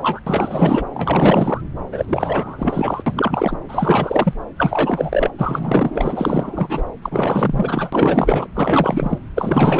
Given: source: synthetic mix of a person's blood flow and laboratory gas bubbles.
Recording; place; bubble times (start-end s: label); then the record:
Doppler ultrasound of blood flow; subclavian vein
0.00-0.20 s: bubbles
0.26-0.84 s: bubbles
0.93-1.61 s: bubbles
1.92-2.05 s: bubbles
2.08-3.03 s: bubbles
3.06-3.58 s: bubbles
3.68-4.33 s: bubbles
4.57-5.31 s: bubbles
5.38-6.83 s: bubbles
7.02-8.47 s: bubbles
8.54-9.18 s: bubbles
9.35-9.80 s: bubbles
From the record:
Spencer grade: 4 (maximum detectable bubble signal sounding continuously throughout systole and diastole of every cardiac period, and overriding the amplitude of the normal cardiac signals); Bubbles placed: anywhere in the cardiac cycle